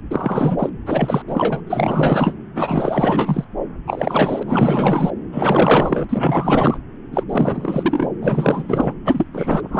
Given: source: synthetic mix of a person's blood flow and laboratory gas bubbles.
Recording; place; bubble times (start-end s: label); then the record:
Doppler ultrasound of blood flow; subclavian vein
0.10-0.70 s: bubbles
0.86-1.22 s: bubbles
1.28-1.61 s: bubbles
1.67-2.34 s: bubbles
2.54-3.44 s: bubbles
3.87-4.43 s: bubbles
4.46-5.12 s: bubbles
5.32-6.04 s: bubbles
6.09-6.78 s: bubbles
7.12-7.24 s: bubbles
7.29-8.09 s: bubbles
8.21-8.94 s: bubbles
9.05-9.25 s: bubbles
9.34-9.79 s: bubbles
From the record:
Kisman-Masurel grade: 444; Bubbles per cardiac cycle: continuous sound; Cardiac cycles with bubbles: 100%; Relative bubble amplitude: maximal (0.775 to 0.999); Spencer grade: 4 (maximum detectable bubble signal sounding continuously throughout systole and diastole of every cardiac period, and overriding the amplitude of the normal cardiac signals); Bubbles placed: anywhere in the cardiac cycle